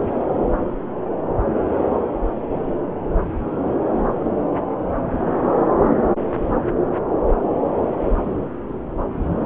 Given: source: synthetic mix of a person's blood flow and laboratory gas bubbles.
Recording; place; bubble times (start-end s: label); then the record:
Doppler ultrasound of blood flow; subclavian vein
no bubbles
From the record:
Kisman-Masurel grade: 000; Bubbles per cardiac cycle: 0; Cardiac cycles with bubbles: 0%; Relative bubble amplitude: no bubbles discernible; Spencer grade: 0 (complete lack of bubble signals)